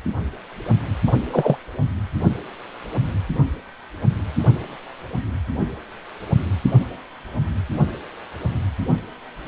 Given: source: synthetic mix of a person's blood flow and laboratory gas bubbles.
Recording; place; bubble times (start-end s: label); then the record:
Doppler ultrasound of blood flow; precordium
1.08-1.12 s: bubbles
1.31-1.56 s: bubbles
From the record:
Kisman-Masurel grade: 113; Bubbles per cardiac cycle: 1 to 2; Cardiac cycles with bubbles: 1 to 10%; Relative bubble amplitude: loud (0.450 to 0.775); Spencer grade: 1 (occasional bubble signal discernible with the cardiac motion signal, with majority of cardiac periods free of bubbles); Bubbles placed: anywhere in the cardiac cycle